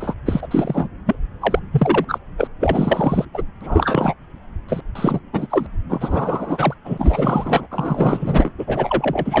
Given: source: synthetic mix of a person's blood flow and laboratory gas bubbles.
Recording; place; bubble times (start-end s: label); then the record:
Doppler ultrasound of blood flow; subclavian vein
0.00-0.15 s: bubbles
0.26-0.47 s: bubbles
0.51-0.89 s: bubbles
1.06-1.15 s: bubbles
1.41-1.60 s: bubbles
1.71-2.04 s: bubbles
2.08-2.18 s: bubbles
2.36-2.48 s: bubbles
2.60-3.25 s: bubbles
3.33-3.42 s: bubbles
3.60-4.14 s: bubbles
4.69-4.81 s: bubbles
4.95-5.20 s: bubbles
5.33-5.47 s: bubbles
5.50-5.67 s: bubbles
5.89-6.75 s: bubbles
6.85-7.67 s: bubbles
7.71-8.52 s: bubbles
8.58-9.40 s: bubbles
From the record:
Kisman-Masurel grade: 343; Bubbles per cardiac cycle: rolling drumbeat, 9 or more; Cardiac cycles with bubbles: 100%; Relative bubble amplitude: loud (0.450 to 0.775); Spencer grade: 3 (all of the cardiac periods contain showers or single bubble signals, but not dominating or overriding the cardiac motion signals); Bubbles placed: anywhere in the cardiac cycle